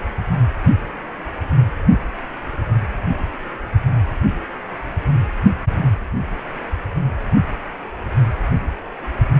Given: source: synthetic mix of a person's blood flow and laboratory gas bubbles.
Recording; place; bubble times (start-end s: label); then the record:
Doppler ultrasound of blood flow; precordium
no bubbles
From the record:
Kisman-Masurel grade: 000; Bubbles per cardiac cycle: 0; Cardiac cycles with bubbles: 0%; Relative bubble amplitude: no bubbles discernible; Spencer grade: 0 (complete lack of bubble signals)